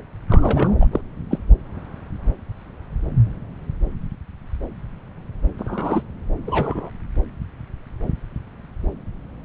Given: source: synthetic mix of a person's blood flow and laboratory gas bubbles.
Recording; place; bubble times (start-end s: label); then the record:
Doppler ultrasound of blood flow; subclavian vein
0.28-0.73 s: bubbles
0.80-0.88 s: bubbles
0.91-1.01 s: bubbles
1.30-1.38 s: bubbles
5.58-6.03 s: bubbles
6.46-6.91 s: bubbles
From the record:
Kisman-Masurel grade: 222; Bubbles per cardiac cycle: several, 3 to 8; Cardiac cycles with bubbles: 10 to 50%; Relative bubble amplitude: moderate (0.250 to 0.450); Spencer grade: 2 (many but less than half of the cardiac periods contain bubble signals, singularly or in groups); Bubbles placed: anywhere in the cardiac cycle